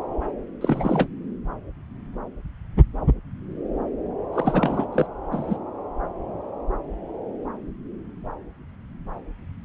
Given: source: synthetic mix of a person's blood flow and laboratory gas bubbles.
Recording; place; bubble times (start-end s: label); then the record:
Doppler ultrasound of blood flow; subclavian vein
0.61-1.07 s: bubbles
4.33-4.87 s: bubbles
4.92-5.07 s: bubbles
5.32-5.58 s: bubbles
From the record:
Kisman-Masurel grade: 222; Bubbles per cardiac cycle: several, 3 to 8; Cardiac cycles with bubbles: 10 to 50%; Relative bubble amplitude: moderate (0.250 to 0.450); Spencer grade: 2 (many but less than half of the cardiac periods contain bubble signals, singularly or in groups); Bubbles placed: anywhere in the cardiac cycle